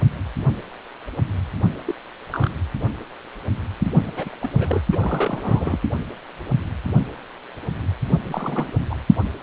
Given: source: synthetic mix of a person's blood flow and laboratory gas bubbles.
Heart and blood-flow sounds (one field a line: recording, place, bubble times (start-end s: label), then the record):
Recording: Doppler ultrasound of blood flow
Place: precordium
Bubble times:
1.85-1.94 s: bubbles
2.31-2.52 s: bubbles
4.05-4.12 s: bubbles
4.17-4.37 s: bubbles
4.41-4.81 s: bubbles
4.92-5.79 s: bubbles
8.25-8.71 s: bubbles
8.89-8.96 s: bubbles
From the record:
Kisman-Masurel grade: 221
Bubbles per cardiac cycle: several, 3 to 8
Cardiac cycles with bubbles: 10 to 50%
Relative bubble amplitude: barely perceptible (0.100 to 0.250)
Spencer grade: 2 (many but less than half of the cardiac periods contain bubble signals, singularly or in groups)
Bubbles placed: only in the low amplitude regions of the cardiac cycle